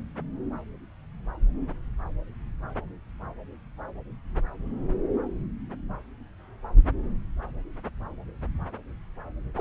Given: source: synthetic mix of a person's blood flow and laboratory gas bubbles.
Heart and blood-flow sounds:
Doppler ultrasound of blood flow; subclavian vein
9.56-9.61 s: bubbles
From the record:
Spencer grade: 1 (occasional bubble signal discernible with the cardiac motion signal, with majority of cardiac periods free of bubbles); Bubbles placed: anywhere in the cardiac cycle

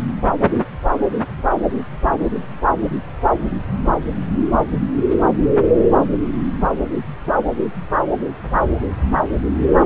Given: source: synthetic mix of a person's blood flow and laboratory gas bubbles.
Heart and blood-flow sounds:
Doppler ultrasound of blood flow; subclavian vein
no bubbles
From the record:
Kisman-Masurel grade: 000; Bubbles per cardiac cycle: 0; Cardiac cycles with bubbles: 0%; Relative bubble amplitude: no bubbles discernible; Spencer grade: 0 (complete lack of bubble signals)

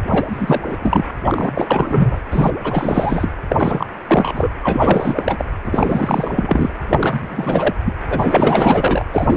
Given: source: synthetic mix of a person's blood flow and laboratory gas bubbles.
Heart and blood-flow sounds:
Doppler ultrasound of blood flow; precordium
0.03-0.62 s: bubbles
0.67-0.77 s: bubbles
0.82-1.05 s: bubbles
1.23-2.21 s: bubbles
2.31-2.51 s: bubbles
2.63-3.31 s: bubbles
3.48-3.86 s: bubbles
4.07-4.51 s: bubbles
4.63-5.45 s: bubbles
5.64-6.70 s: bubbles
6.88-7.74 s: bubbles
7.85-7.93 s: bubbles
8.09-9.04 s: bubbles
9.12-9.37 s: bubbles
From the record:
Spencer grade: 4 (maximum detectable bubble signal sounding continuously throughout systole and diastole of every cardiac period, and overriding the amplitude of the normal cardiac signals); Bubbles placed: anywhere in the cardiac cycle

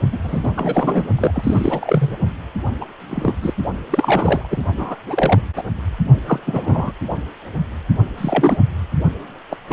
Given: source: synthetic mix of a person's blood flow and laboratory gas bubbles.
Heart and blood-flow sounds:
Doppler ultrasound of blood flow; precordium
0.12-0.18 s: bubbles
0.23-0.40 s: bubbles
0.43-1.06 s: bubbles
1.18-2.18 s: bubbles
2.81-2.85 s: bubbles
3.10-3.33 s: bubbles
3.42-3.54 s: bubbles
3.90-4.63 s: bubbles
4.77-4.95 s: bubbles
5.06-5.40 s: bubbles
5.56-5.63 s: bubbles
6.26-6.40 s: bubbles
6.45-6.92 s: bubbles
8.18-8.58 s: bubbles
9.50-9.57 s: bubbles
9.68-9.72 s: bubbles
From the record:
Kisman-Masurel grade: 242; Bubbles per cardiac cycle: several, 3 to 8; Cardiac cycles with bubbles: 100%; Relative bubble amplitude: moderate (0.250 to 0.450); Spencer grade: 3 (all of the cardiac periods contain showers or single bubble signals, but not dominating or overriding the cardiac motion signals); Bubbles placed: only in the low amplitude regions of the cardiac cycle

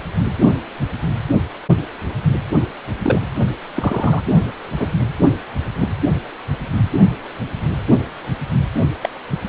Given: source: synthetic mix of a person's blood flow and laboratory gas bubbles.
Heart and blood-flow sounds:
Doppler ultrasound of blood flow; precordium
3.03-3.21 s: bubbles
3.76-4.22 s: bubbles
4.79-4.88 s: bubbles
5.75-5.89 s: bubbles
9.02-9.09 s: bubbles
From the record:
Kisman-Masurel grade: 122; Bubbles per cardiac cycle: 1 to 2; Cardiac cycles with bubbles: 10 to 50%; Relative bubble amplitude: moderate (0.250 to 0.450); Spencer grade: 2 (many but less than half of the cardiac periods contain bubble signals, singularly or in groups); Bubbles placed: only in the low amplitude regions of the cardiac cycle

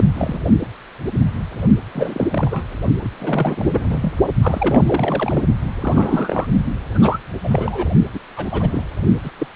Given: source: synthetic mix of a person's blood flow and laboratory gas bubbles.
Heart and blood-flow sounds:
Doppler ultrasound of blood flow; precordium
0.00-0.04 s: bubbles
0.14-0.40 s: bubbles
1.92-2.65 s: bubbles
3.01-3.09 s: bubbles
3.19-4.12 s: bubbles
4.42-4.82 s: bubbles
4.86-5.43 s: bubbles
5.82-6.46 s: bubbles
6.95-7.19 s: bubbles
7.43-7.88 s: bubbles
8.12-8.20 s: bubbles
8.36-8.84 s: bubbles
9.23-9.31 s: bubbles
9.38-9.47 s: bubbles
From the record:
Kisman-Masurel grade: 332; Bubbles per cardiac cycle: rolling drumbeat, 9 or more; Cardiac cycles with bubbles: 50 to 99%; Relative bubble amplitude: moderate (0.250 to 0.450); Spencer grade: 3 (all of the cardiac periods contain showers or single bubble signals, but not dominating or overriding the cardiac motion signals); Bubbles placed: only in the low amplitude regions of the cardiac cycle

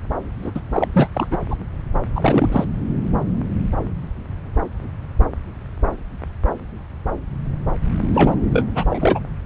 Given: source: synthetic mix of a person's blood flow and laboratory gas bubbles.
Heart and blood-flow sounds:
Doppler ultrasound of blood flow; subclavian vein
0.43-0.51 s: bubbles
0.54-0.60 s: bubbles
0.72-0.88 s: bubbles
0.92-1.07 s: bubbles
1.14-1.27 s: bubbles
1.30-1.38 s: bubbles
1.48-1.57 s: bubbles
2.15-2.65 s: bubbles
8.14-8.35 s: bubbles
8.52-8.65 s: bubbles
8.75-8.85 s: bubbles
8.90-9.20 s: bubbles
From the record:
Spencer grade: 2 (many but less than half of the cardiac periods contain bubble signals, singularly or in groups); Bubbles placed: anywhere in the cardiac cycle

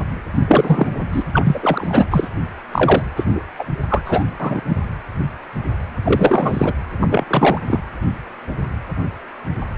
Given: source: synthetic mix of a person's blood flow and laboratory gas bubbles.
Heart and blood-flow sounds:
Doppler ultrasound of blood flow; precordium
0.47-0.87 s: bubbles
1.12-1.24 s: bubbles
1.33-2.06 s: bubbles
2.10-2.28 s: bubbles
2.71-3.02 s: bubbles
3.16-3.24 s: bubbles
3.34-3.41 s: bubbles
3.58-3.64 s: bubbles
3.89-4.02 s: bubbles
4.06-4.24 s: bubbles
4.40-4.62 s: bubbles
4.69-4.77 s: bubbles
6.04-6.74 s: bubbles
7.00-7.25 s: bubbles
7.27-7.59 s: bubbles
7.67-7.79 s: bubbles
From the record:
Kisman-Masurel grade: 333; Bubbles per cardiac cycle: rolling drumbeat, 9 or more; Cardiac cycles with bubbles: 50 to 99%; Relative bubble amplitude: loud (0.450 to 0.775); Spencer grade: 3 (all of the cardiac periods contain showers or single bubble signals, but not dominating or overriding the cardiac motion signals); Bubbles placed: anywhere in the cardiac cycle

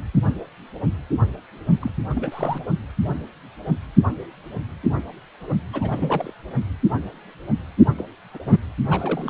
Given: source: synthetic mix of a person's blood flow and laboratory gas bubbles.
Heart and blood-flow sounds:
Doppler ultrasound of blood flow; precordium
1.80-1.90 s: bubbles
2.09-2.65 s: bubbles
5.73-6.33 s: bubbles
7.98-8.04 s: bubbles
8.33-8.38 s: bubbles
8.45-8.56 s: bubbles
8.89-9.30 s: bubbles
From the record:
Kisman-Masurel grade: 221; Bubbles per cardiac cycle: several, 3 to 8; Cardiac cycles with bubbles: 10 to 50%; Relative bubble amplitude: barely perceptible (0.100 to 0.250); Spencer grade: 2 (many but less than half of the cardiac periods contain bubble signals, singularly or in groups); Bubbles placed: only in the low amplitude regions of the cardiac cycle

